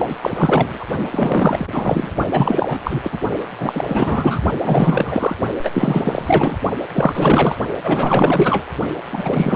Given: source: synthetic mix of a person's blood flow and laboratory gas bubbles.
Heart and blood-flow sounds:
Doppler ultrasound of blood flow; precordium
0.00-0.17 s: bubbles
0.21-0.84 s: bubbles
1.11-2.11 s: bubbles
2.31-3.19 s: bubbles
3.58-4.43 s: bubbles
4.64-5.36 s: bubbles
5.62-6.58 s: bubbles
6.93-7.57 s: bubbles
7.83-8.66 s: bubbles
9.12-9.56 s: bubbles
From the record:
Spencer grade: 4 (maximum detectable bubble signal sounding continuously throughout systole and diastole of every cardiac period, and overriding the amplitude of the normal cardiac signals); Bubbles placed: only in the low amplitude regions of the cardiac cycle

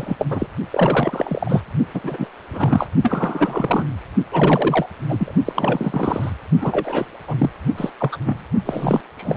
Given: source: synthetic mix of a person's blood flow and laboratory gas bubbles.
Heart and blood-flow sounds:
Doppler ultrasound of blood flow; precordium
0.00-0.16 s: bubbles
0.18-0.27 s: bubbles
0.30-0.47 s: bubbles
0.71-1.64 s: bubbles
1.94-2.00 s: bubbles
2.03-2.29 s: bubbles
2.52-2.86 s: bubbles
3.02-3.84 s: bubbles
4.32-4.86 s: bubbles
5.08-5.32 s: bubbles
5.45-6.30 s: bubbles
6.61-7.05 s: bubbles
7.28-7.50 s: bubbles
7.77-7.91 s: bubbles
7.99-8.18 s: bubbles
8.26-8.44 s: bubbles
8.65-9.01 s: bubbles
9.17-9.37 s: bubbles
From the record:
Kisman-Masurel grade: 343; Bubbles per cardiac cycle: rolling drumbeat, 9 or more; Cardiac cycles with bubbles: 100%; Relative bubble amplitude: loud (0.450 to 0.775); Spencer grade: 3 (all of the cardiac periods contain showers or single bubble signals, but not dominating or overriding the cardiac motion signals); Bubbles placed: only in the low amplitude regions of the cardiac cycle

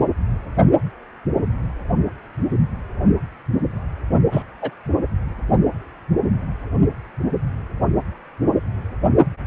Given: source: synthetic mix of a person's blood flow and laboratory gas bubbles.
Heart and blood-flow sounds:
Doppler ultrasound of blood flow; precordium
4.31-4.43 s: bubbles
4.62-4.70 s: bubbles
From the record:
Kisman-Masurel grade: 112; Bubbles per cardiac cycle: 1 to 2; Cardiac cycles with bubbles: 1 to 10%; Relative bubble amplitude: moderate (0.250 to 0.450); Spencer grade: 1 (occasional bubble signal discernible with the cardiac motion signal, with majority of cardiac periods free of bubbles); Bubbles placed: only in the low amplitude regions of the cardiac cycle

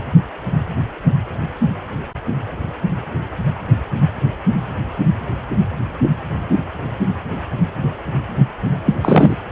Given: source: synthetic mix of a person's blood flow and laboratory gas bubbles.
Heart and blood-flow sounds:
Doppler ultrasound of blood flow; precordium
8.86-8.95 s: bubbles
9.01-9.37 s: bubbles
From the record:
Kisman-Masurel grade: 213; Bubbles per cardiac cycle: several, 3 to 8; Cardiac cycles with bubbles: 1 to 10%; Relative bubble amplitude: loud (0.450 to 0.775); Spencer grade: 1 (occasional bubble signal discernible with the cardiac motion signal, with majority of cardiac periods free of bubbles); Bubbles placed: anywhere in the cardiac cycle

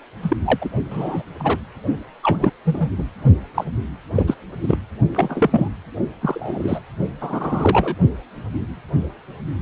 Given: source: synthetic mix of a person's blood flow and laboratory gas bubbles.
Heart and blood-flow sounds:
Doppler ultrasound of blood flow; precordium
0.22-0.36 s: bubbles
0.44-0.69 s: bubbles
0.91-1.24 s: bubbles
1.39-1.57 s: bubbles
2.23-2.50 s: bubbles
2.65-2.89 s: bubbles
2.98-3.04 s: bubbles
3.54-3.65 s: bubbles
4.14-4.36 s: bubbles
4.61-4.78 s: bubbles
5.14-5.68 s: bubbles
6.21-6.80 s: bubbles
7.21-7.95 s: bubbles
From the record:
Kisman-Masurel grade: 232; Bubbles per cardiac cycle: several, 3 to 8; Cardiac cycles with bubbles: 50 to 99%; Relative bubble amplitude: moderate (0.250 to 0.450); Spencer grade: 3 (all of the cardiac periods contain showers or single bubble signals, but not dominating or overriding the cardiac motion signals); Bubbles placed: only in the low amplitude regions of the cardiac cycle

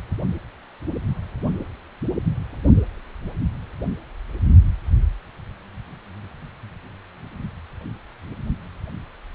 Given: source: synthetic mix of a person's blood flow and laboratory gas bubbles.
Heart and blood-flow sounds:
Doppler ultrasound of blood flow; precordium
no bubbles
From the record:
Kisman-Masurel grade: 000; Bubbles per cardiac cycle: 0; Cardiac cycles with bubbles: 0%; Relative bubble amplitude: no bubbles discernible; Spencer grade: 0 (complete lack of bubble signals)

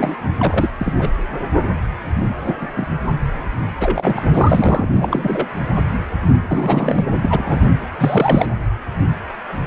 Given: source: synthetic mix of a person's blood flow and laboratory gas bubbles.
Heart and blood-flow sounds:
Doppler ultrasound of blood flow; precordium
0.00-0.15 s: bubbles
0.40-0.69 s: bubbles
0.79-0.93 s: bubbles
0.98-1.11 s: bubbles
2.47-2.55 s: bubbles
2.61-2.67 s: bubbles
2.76-2.87 s: bubbles
3.79-4.22 s: bubbles
4.33-4.88 s: bubbles
4.93-5.48 s: bubbles
6.49-7.06 s: bubbles
7.17-7.72 s: bubbles
7.98-8.46 s: bubbles
From the record:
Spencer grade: 3 (all of the cardiac periods contain showers or single bubble signals, but not dominating or overriding the cardiac motion signals); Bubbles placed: anywhere in the cardiac cycle

